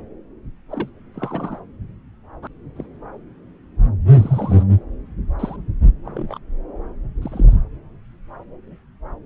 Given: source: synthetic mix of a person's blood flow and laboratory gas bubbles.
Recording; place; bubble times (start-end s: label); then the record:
Doppler ultrasound of blood flow; subclavian vein
0.70-0.89 s: bubbles
1.15-1.59 s: bubbles
2.42-2.47 s: bubbles
2.75-2.86 s: bubbles
4.11-4.63 s: bubbles
5.39-5.56 s: bubbles
6.04-6.38 s: bubbles
7.21-7.55 s: bubbles
From the record:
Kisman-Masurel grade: 121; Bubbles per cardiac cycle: 1 to 2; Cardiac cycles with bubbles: 10 to 50%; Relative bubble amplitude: barely perceptible (0.100 to 0.250); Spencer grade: 2 (many but less than half of the cardiac periods contain bubble signals, singularly or in groups); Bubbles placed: anywhere in the cardiac cycle